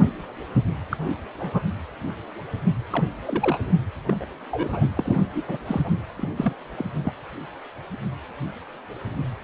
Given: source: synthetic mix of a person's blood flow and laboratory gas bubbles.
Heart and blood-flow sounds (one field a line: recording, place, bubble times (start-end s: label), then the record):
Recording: Doppler ultrasound of blood flow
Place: precordium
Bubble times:
0.90-0.97 s: bubbles
1.39-1.62 s: bubbles
2.90-3.04 s: bubbles
3.26-3.72 s: bubbles
4.08-4.25 s: bubbles
4.51-4.85 s: bubbles
4.96-5.20 s: bubbles
5.34-5.42 s: bubbles
5.47-5.57 s: bubbles
5.66-5.92 s: bubbles
6.17-6.29 s: bubbles
6.37-6.53 s: bubbles
6.76-6.85 s: bubbles
6.93-7.00 s: bubbles
7.04-7.13 s: bubbles
From the record:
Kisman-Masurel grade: 232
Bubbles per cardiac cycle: several, 3 to 8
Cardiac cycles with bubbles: 50 to 99%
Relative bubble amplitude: moderate (0.250 to 0.450)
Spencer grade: 3 (all of the cardiac periods contain showers or single bubble signals, but not dominating or overriding the cardiac motion signals)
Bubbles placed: anywhere in the cardiac cycle